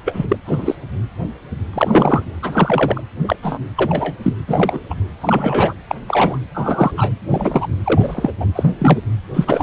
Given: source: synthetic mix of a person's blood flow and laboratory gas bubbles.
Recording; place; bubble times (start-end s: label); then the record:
Doppler ultrasound of blood flow; precordium
0.05-0.26 s: bubbles
0.29-0.37 s: bubbles
0.46-0.75 s: bubbles
1.73-2.23 s: bubbles
2.42-3.01 s: bubbles
3.23-3.36 s: bubbles
3.42-3.58 s: bubbles
3.77-4.14 s: bubbles
4.23-4.33 s: bubbles
4.48-4.83 s: bubbles
4.90-4.94 s: bubbles
5.21-5.74 s: bubbles
5.88-5.95 s: bubbles
6.08-6.38 s: bubbles
6.54-7.12 s: bubbles
7.30-7.67 s: bubbles
7.84-8.31 s: bubbles
8.40-8.46 s: bubbles
8.55-8.68 s: bubbles
8.78-8.98 s: bubbles
9.33-9.63 s: bubbles
From the record:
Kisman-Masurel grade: 233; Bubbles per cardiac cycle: several, 3 to 8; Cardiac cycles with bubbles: 50 to 99%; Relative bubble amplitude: loud (0.450 to 0.775); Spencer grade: 3 (all of the cardiac periods contain showers or single bubble signals, but not dominating or overriding the cardiac motion signals); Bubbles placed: anywhere in the cardiac cycle